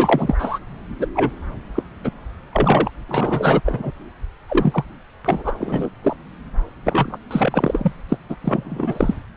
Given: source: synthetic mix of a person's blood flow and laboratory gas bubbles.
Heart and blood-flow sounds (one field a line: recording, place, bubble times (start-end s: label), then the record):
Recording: Doppler ultrasound of blood flow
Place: subclavian vein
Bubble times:
0.00-0.35 s: bubbles
0.39-0.58 s: bubbles
0.99-1.06 s: bubbles
1.15-1.31 s: bubbles
1.75-1.83 s: bubbles
2.03-2.09 s: bubbles
2.52-2.90 s: bubbles
3.08-3.61 s: bubbles
3.65-3.91 s: bubbles
4.48-4.84 s: bubbles
5.25-5.90 s: bubbles
6.04-6.17 s: bubbles
6.84-7.17 s: bubbles
7.30-7.92 s: bubbles
8.08-8.17 s: bubbles
8.29-8.36 s: bubbles
8.44-9.14 s: bubbles
From the record:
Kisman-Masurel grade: 242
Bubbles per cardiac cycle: several, 3 to 8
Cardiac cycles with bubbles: 100%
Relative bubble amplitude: moderate (0.250 to 0.450)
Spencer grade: 3 (all of the cardiac periods contain showers or single bubble signals, but not dominating or overriding the cardiac motion signals)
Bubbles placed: anywhere in the cardiac cycle